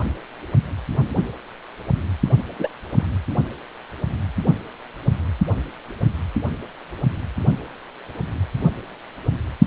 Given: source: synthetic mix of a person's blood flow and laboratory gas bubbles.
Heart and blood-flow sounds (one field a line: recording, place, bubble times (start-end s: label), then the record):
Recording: Doppler ultrasound of blood flow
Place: precordium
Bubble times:
2.59-2.69 s: bubbles
2.96-3.04 s: bubbles
From the record:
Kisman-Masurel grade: 112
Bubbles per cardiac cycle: 1 to 2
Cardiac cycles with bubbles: 1 to 10%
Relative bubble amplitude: moderate (0.250 to 0.450)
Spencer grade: 1 (occasional bubble signal discernible with the cardiac motion signal, with majority of cardiac periods free of bubbles)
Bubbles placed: only in the low amplitude regions of the cardiac cycle